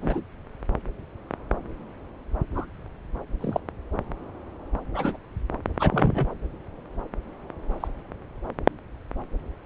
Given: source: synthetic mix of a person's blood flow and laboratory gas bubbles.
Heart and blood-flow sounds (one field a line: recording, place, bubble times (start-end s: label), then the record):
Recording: Doppler ultrasound of blood flow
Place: subclavian vein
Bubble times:
0.01-0.21 s: bubbles
2.54-2.66 s: bubbles
3.41-3.60 s: bubbles
4.94-5.17 s: bubbles
5.79-6.28 s: bubbles
7.80-7.88 s: bubbles
From the record:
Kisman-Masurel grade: 122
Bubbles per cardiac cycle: 1 to 2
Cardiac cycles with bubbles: 10 to 50%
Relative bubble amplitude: moderate (0.250 to 0.450)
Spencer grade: 2 (many but less than half of the cardiac periods contain bubble signals, singularly or in groups)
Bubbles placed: anywhere in the cardiac cycle